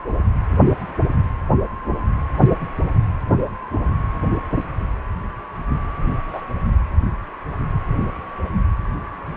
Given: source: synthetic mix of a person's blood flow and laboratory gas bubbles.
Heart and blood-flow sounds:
Doppler ultrasound of blood flow; precordium
6.28-6.41 s: bubbles
From the record:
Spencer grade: 1 (occasional bubble signal discernible with the cardiac motion signal, with majority of cardiac periods free of bubbles); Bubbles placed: anywhere in the cardiac cycle

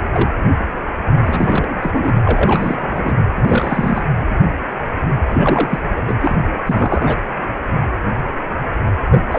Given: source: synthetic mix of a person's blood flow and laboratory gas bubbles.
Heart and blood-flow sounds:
Doppler ultrasound of blood flow; precordium
0.13-0.29 s: bubbles
1.24-2.14 s: bubbles
2.24-3.14 s: bubbles
3.37-4.05 s: bubbles
5.30-5.79 s: bubbles
5.96-6.01 s: bubbles
6.07-6.16 s: bubbles
6.21-6.37 s: bubbles
6.66-7.16 s: bubbles
9.10-9.20 s: bubbles
9.30-9.39 s: bubbles
From the record:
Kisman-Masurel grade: 332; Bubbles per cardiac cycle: rolling drumbeat, 9 or more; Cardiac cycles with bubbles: 50 to 99%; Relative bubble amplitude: moderate (0.250 to 0.450); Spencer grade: 3 (all of the cardiac periods contain showers or single bubble signals, but not dominating or overriding the cardiac motion signals); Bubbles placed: anywhere in the cardiac cycle

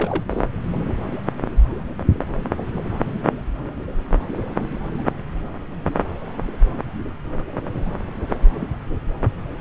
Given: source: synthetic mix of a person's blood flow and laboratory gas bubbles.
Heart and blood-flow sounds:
Doppler ultrasound of blood flow; subclavian vein
0.00-0.26 s: bubbles
0.29-0.44 s: bubbles
From the record:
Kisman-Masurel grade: 212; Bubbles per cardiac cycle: several, 3 to 8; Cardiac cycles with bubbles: 1 to 10%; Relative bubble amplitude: moderate (0.250 to 0.450); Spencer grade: 1 (occasional bubble signal discernible with the cardiac motion signal, with majority of cardiac periods free of bubbles); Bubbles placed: anywhere in the cardiac cycle

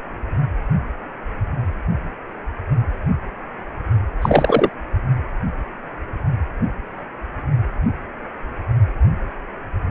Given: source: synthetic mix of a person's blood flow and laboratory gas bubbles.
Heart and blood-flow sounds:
Doppler ultrasound of blood flow; precordium
4.22-4.70 s: bubbles
From the record:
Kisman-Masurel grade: 213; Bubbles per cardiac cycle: several, 3 to 8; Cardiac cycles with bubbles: 1 to 10%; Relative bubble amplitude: loud (0.450 to 0.775); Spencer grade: 1 (occasional bubble signal discernible with the cardiac motion signal, with majority of cardiac periods free of bubbles); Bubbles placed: only in the low amplitude regions of the cardiac cycle

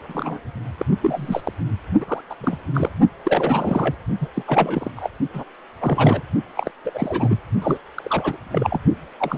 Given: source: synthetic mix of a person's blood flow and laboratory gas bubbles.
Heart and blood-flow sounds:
Doppler ultrasound of blood flow; precordium
0.08-0.40 s: bubbles
0.79-0.85 s: bubbles
1.03-1.53 s: bubbles
2.00-2.21 s: bubbles
2.29-2.35 s: bubbles
2.41-2.58 s: bubbles
2.73-2.89 s: bubbles
3.24-3.95 s: bubbles
4.20-4.28 s: bubbles
4.34-4.42 s: bubbles
4.47-4.91 s: bubbles
4.96-5.09 s: bubbles
5.33-5.43 s: bubbles
5.80-6.22 s: bubbles
6.57-6.71 s: bubbles
6.84-6.90 s: bubbles
6.93-7.38 s: bubbles
7.62-7.78 s: bubbles
7.98-8.36 s: bubbles
8.52-8.79 s: bubbles
9.19-9.38 s: bubbles
From the record:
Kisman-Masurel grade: 342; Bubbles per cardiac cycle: rolling drumbeat, 9 or more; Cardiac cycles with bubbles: 100%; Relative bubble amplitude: moderate (0.250 to 0.450); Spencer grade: 3 (all of the cardiac periods contain showers or single bubble signals, but not dominating or overriding the cardiac motion signals); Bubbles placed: only in the low amplitude regions of the cardiac cycle

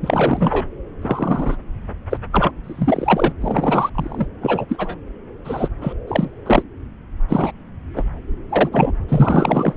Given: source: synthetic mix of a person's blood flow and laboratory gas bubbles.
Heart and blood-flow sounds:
Doppler ultrasound of blood flow; subclavian vein
0.02-0.66 s: bubbles
1.02-1.56 s: bubbles
2.09-2.18 s: bubbles
2.31-2.51 s: bubbles
2.64-3.32 s: bubbles
3.40-3.90 s: bubbles
3.95-4.27 s: bubbles
4.41-4.65 s: bubbles
4.69-4.96 s: bubbles
5.45-5.68 s: bubbles
5.81-5.93 s: bubbles
6.07-6.32 s: bubbles
6.46-6.63 s: bubbles
7.29-7.51 s: bubbles
7.96-8.04 s: bubbles
8.49-8.69 s: bubbles
8.71-8.92 s: bubbles
9.08-9.73 s: bubbles
From the record:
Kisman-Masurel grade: 243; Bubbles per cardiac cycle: several, 3 to 8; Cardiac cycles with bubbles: 100%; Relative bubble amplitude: loud (0.450 to 0.775); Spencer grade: 3 (all of the cardiac periods contain showers or single bubble signals, but not dominating or overriding the cardiac motion signals); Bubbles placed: anywhere in the cardiac cycle

